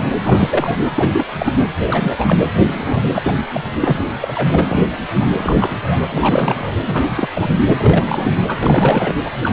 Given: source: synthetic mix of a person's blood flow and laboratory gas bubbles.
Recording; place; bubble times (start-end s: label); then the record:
Doppler ultrasound of blood flow; precordium
0.00-0.08 s: bubbles
0.24-0.77 s: bubbles
0.95-1.26 s: bubbles
1.38-1.54 s: bubbles
1.86-2.37 s: bubbles
2.67-3.03 s: bubbles
3.13-3.33 s: bubbles
3.53-3.60 s: bubbles
3.81-4.06 s: bubbles
4.20-4.81 s: bubbles
5.19-6.06 s: bubbles
6.11-6.73 s: bubbles
6.87-7.28 s: bubbles
7.33-7.54 s: bubbles
7.67-8.43 s: bubbles
8.47-9.13 s: bubbles
9.24-9.30 s: bubbles
9.43-9.53 s: bubbles
From the record:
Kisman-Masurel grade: 342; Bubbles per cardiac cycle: rolling drumbeat, 9 or more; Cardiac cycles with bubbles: 100%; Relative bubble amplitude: moderate (0.250 to 0.450); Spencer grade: 3 (all of the cardiac periods contain showers or single bubble signals, but not dominating or overriding the cardiac motion signals); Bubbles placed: anywhere in the cardiac cycle